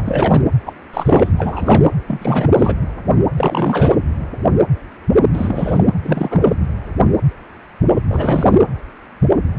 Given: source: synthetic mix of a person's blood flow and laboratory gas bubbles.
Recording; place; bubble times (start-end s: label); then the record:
Doppler ultrasound of blood flow; precordium
0.00-0.42 s: bubbles
0.65-0.73 s: bubbles
0.93-1.32 s: bubbles
1.37-1.91 s: bubbles
2.08-2.48 s: bubbles
2.56-2.75 s: bubbles
3.36-3.97 s: bubbles
5.33-5.83 s: bubbles
6.03-6.63 s: bubbles
8.08-8.59 s: bubbles
From the record:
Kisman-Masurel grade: 333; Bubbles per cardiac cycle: rolling drumbeat, 9 or more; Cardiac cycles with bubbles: 50 to 99%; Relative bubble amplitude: loud (0.450 to 0.775); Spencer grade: 3 (all of the cardiac periods contain showers or single bubble signals, but not dominating or overriding the cardiac motion signals); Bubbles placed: anywhere in the cardiac cycle